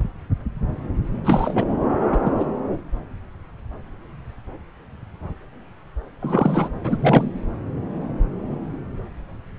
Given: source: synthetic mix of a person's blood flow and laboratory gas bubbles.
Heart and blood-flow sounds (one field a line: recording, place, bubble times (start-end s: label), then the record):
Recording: Doppler ultrasound of blood flow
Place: subclavian vein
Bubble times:
1.23-1.65 s: bubbles
2.10-2.19 s: bubbles
2.21-2.32 s: bubbles
2.37-2.46 s: bubbles
6.21-6.69 s: bubbles
6.83-7.31 s: bubbles
From the record:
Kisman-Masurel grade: 223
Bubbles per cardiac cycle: several, 3 to 8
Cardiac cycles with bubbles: 10 to 50%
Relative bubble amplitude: loud (0.450 to 0.775)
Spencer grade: 2 (many but less than half of the cardiac periods contain bubble signals, singularly or in groups)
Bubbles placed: anywhere in the cardiac cycle